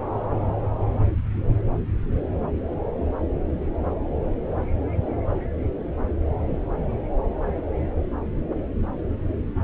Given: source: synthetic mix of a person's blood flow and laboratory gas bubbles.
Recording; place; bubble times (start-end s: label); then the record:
Doppler ultrasound of blood flow; subclavian vein
no bubbles
From the record:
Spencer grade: 0 (complete lack of bubble signals)